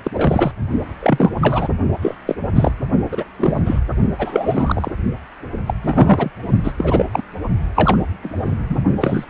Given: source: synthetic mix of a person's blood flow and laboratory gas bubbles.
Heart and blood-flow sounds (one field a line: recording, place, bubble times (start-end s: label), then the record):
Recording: Doppler ultrasound of blood flow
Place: precordium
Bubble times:
0.05-0.52 s: bubbles
1.00-1.31 s: bubbles
1.41-1.68 s: bubbles
2.01-2.15 s: bubbles
2.26-2.35 s: bubbles
2.55-2.72 s: bubbles
3.11-3.25 s: bubbles
3.39-3.79 s: bubbles
4.19-4.91 s: bubbles
5.66-5.74 s: bubbles
5.83-6.32 s: bubbles
6.64-6.73 s: bubbles
6.78-7.06 s: bubbles
7.12-7.22 s: bubbles
7.75-8.00 s: bubbles
8.23-8.52 s: bubbles
8.69-8.77 s: bubbles
9.01-9.24 s: bubbles
From the record:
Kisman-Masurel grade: 243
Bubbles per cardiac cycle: several, 3 to 8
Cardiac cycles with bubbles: 100%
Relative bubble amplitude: loud (0.450 to 0.775)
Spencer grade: 3 (all of the cardiac periods contain showers or single bubble signals, but not dominating or overriding the cardiac motion signals)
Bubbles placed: only in the low amplitude regions of the cardiac cycle